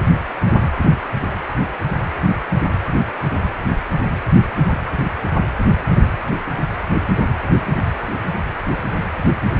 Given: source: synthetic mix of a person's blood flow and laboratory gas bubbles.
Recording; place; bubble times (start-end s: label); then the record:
Doppler ultrasound of blood flow; precordium
no bubbles
From the record:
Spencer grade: 0 (complete lack of bubble signals)